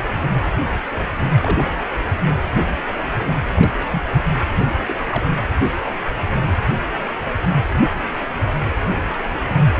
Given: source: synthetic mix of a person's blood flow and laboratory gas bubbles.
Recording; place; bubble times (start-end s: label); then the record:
Doppler ultrasound of blood flow; precordium
1.40-1.71 s: bubbles
3.54-3.71 s: bubbles
3.92-4.02 s: bubbles
4.87-4.95 s: bubbles
5.11-5.24 s: bubbles
From the record:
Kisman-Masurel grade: 121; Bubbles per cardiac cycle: 1 to 2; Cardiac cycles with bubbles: 10 to 50%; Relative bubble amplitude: barely perceptible (0.100 to 0.250); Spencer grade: 2 (many but less than half of the cardiac periods contain bubble signals, singularly or in groups); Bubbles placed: anywhere in the cardiac cycle